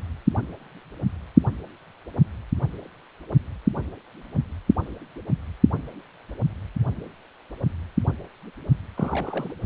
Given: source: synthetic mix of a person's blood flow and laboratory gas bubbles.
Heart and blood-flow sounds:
Doppler ultrasound of blood flow; precordium
8.96-9.53 s: bubbles
From the record:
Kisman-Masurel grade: 211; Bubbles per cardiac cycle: several, 3 to 8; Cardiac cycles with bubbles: 1 to 10%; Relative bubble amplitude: barely perceptible (0.100 to 0.250); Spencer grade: 1 (occasional bubble signal discernible with the cardiac motion signal, with majority of cardiac periods free of bubbles); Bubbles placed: anywhere in the cardiac cycle

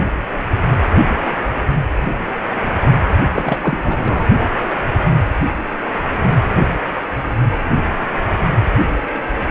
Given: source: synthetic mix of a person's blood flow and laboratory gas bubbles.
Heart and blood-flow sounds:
Doppler ultrasound of blood flow; precordium
3.35-3.58 s: bubbles
3.60-3.78 s: bubbles
3.83-4.26 s: bubbles
From the record:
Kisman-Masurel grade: 212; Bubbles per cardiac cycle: several, 3 to 8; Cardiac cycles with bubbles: 1 to 10%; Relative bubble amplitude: moderate (0.250 to 0.450); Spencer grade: 1 (occasional bubble signal discernible with the cardiac motion signal, with majority of cardiac periods free of bubbles); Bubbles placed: anywhere in the cardiac cycle

